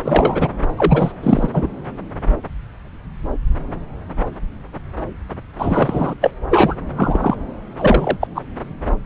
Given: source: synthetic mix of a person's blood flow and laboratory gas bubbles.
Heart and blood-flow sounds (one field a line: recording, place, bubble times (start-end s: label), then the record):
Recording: Doppler ultrasound of blood flow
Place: subclavian vein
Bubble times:
0.00-0.49 s: bubbles
0.77-1.12 s: bubbles
1.23-1.50 s: bubbles
1.54-1.67 s: bubbles
5.58-6.14 s: bubbles
6.21-6.31 s: bubbles
6.50-6.75 s: bubbles
6.96-7.36 s: bubbles
7.76-8.17 s: bubbles
8.21-8.28 s: bubbles
8.35-8.42 s: bubbles
From the record:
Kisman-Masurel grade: 333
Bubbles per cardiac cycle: rolling drumbeat, 9 or more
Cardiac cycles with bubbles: 50 to 99%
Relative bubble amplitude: loud (0.450 to 0.775)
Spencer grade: 3 (all of the cardiac periods contain showers or single bubble signals, but not dominating or overriding the cardiac motion signals)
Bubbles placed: anywhere in the cardiac cycle